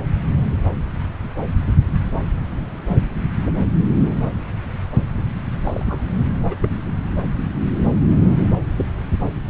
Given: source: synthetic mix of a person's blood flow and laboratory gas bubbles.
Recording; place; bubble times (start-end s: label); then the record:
Doppler ultrasound of blood flow; subclavian vein
5.65-5.99 s: bubbles
6.50-6.56 s: bubbles
6.61-6.70 s: bubbles
8.77-8.87 s: bubbles
From the record:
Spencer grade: 2 (many but less than half of the cardiac periods contain bubble signals, singularly or in groups); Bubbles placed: anywhere in the cardiac cycle